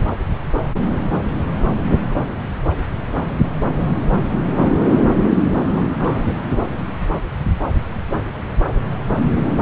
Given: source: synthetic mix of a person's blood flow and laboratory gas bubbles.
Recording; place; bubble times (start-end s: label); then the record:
Doppler ultrasound of blood flow; subclavian vein
5.64-6.34 s: bubbles
From the record:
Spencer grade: 2 (many but less than half of the cardiac periods contain bubble signals, singularly or in groups); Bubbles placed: anywhere in the cardiac cycle